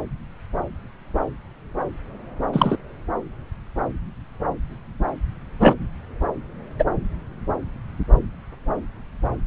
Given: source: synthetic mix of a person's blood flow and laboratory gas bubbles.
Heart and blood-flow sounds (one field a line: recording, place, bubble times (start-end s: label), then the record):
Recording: Doppler ultrasound of blood flow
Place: subclavian vein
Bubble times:
2.53-2.77 s: bubbles
5.59-5.73 s: bubbles
6.78-6.84 s: bubbles
From the record:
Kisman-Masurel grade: 123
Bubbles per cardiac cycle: 1 to 2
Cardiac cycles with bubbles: 10 to 50%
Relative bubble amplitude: loud (0.450 to 0.775)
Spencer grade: 2 (many but less than half of the cardiac periods contain bubble signals, singularly or in groups)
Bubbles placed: anywhere in the cardiac cycle